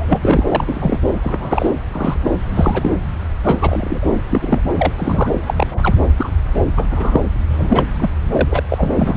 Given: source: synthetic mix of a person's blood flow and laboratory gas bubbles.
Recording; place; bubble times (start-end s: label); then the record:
Doppler ultrasound of blood flow; subclavian vein
0.00-0.47 s: bubbles
0.52-0.99 s: bubbles
1.22-1.71 s: bubbles
1.92-2.17 s: bubbles
2.24-2.30 s: bubbles
2.55-2.91 s: bubbles
3.44-4.06 s: bubbles
4.29-4.60 s: bubbles
4.76-5.36 s: bubbles
5.46-5.96 s: bubbles
6.18-6.31 s: bubbles
6.76-6.86 s: bubbles
6.91-7.21 s: bubbles
7.50-7.85 s: bubbles
7.99-8.11 s: bubbles
8.32-8.63 s: bubbles
8.69-8.91 s: bubbles
8.95-9.17 s: bubbles
From the record:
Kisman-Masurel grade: 243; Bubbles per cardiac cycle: several, 3 to 8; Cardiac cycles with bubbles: 100%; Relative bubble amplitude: loud (0.450 to 0.775); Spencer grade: 3 (all of the cardiac periods contain showers or single bubble signals, but not dominating or overriding the cardiac motion signals); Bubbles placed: anywhere in the cardiac cycle